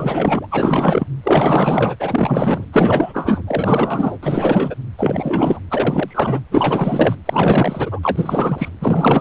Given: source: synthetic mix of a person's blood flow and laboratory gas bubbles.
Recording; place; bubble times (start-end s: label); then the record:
Doppler ultrasound of blood flow; precordium
0.00-0.46 s: bubbles
0.51-1.08 s: bubbles
1.23-1.96 s: bubbles
2.00-2.67 s: bubbles
2.72-3.42 s: bubbles
3.47-4.18 s: bubbles
4.22-4.75 s: bubbles
4.97-5.59 s: bubbles
5.71-6.40 s: bubbles
6.51-7.16 s: bubbles
7.25-8.00 s: bubbles
8.03-8.69 s: bubbles
8.81-9.21 s: bubbles
From the record:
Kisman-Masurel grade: 444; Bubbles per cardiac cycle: continuous sound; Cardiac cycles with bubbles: 100%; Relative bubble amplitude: maximal (0.775 to 0.999); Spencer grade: 4 (maximum detectable bubble signal sounding continuously throughout systole and diastole of every cardiac period, and overriding the amplitude of the normal cardiac signals); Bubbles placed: anywhere in the cardiac cycle